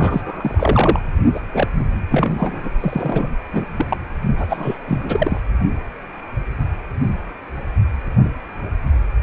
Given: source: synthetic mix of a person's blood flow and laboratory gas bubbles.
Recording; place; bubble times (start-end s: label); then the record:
Doppler ultrasound of blood flow; precordium
0.00-0.99 s: bubbles
1.35-1.40 s: bubbles
1.54-1.67 s: bubbles
2.10-2.69 s: bubbles
2.80-3.28 s: bubbles
3.52-3.66 s: bubbles
3.77-3.85 s: bubbles
3.89-3.97 s: bubbles
4.37-4.78 s: bubbles
4.85-5.41 s: bubbles
From the record:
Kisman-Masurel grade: 332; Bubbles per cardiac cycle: rolling drumbeat, 9 or more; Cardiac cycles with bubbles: 50 to 99%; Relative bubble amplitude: moderate (0.250 to 0.450); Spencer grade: 3 (all of the cardiac periods contain showers or single bubble signals, but not dominating or overriding the cardiac motion signals); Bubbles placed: only in the low amplitude regions of the cardiac cycle